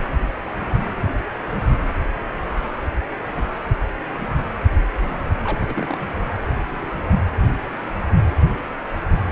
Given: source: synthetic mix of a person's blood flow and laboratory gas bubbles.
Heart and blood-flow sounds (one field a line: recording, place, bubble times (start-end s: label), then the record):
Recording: Doppler ultrasound of blood flow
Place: precordium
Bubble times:
5.44-5.98 s: bubbles
From the record:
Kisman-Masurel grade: 221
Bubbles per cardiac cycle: several, 3 to 8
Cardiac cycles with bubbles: 10 to 50%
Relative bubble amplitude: barely perceptible (0.100 to 0.250)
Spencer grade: 2 (many but less than half of the cardiac periods contain bubble signals, singularly or in groups)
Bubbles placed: anywhere in the cardiac cycle